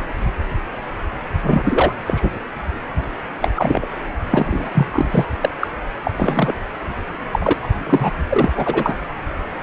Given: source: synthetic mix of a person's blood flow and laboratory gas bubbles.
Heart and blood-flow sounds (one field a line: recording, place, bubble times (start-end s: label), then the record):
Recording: Doppler ultrasound of blood flow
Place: precordium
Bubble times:
1.51-1.61 s: bubbles
1.65-1.93 s: bubbles
2.06-2.22 s: bubbles
3.42-3.50 s: bubbles
3.56-3.87 s: bubbles
4.31-4.69 s: bubbles
4.73-5.25 s: bubbles
5.41-5.47 s: bubbles
5.59-5.67 s: bubbles
6.03-6.11 s: bubbles
6.17-6.53 s: bubbles
7.32-7.53 s: bubbles
7.62-7.68 s: bubbles
7.86-8.12 s: bubbles
8.29-8.50 s: bubbles
8.55-8.95 s: bubbles
From the record:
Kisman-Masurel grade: 233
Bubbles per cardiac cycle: several, 3 to 8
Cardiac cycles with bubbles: 50 to 99%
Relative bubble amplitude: loud (0.450 to 0.775)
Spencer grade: 3 (all of the cardiac periods contain showers or single bubble signals, but not dominating or overriding the cardiac motion signals)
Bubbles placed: anywhere in the cardiac cycle